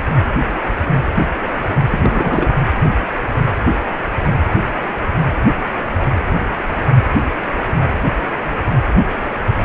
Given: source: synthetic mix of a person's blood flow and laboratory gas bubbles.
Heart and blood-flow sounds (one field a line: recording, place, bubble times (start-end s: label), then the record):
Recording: Doppler ultrasound of blood flow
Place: precordium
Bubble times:
1.90-2.55 s: bubbles
From the record:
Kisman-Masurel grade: 212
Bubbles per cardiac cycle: several, 3 to 8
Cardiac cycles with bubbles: 1 to 10%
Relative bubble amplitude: moderate (0.250 to 0.450)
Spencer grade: 1 (occasional bubble signal discernible with the cardiac motion signal, with majority of cardiac periods free of bubbles)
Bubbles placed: anywhere in the cardiac cycle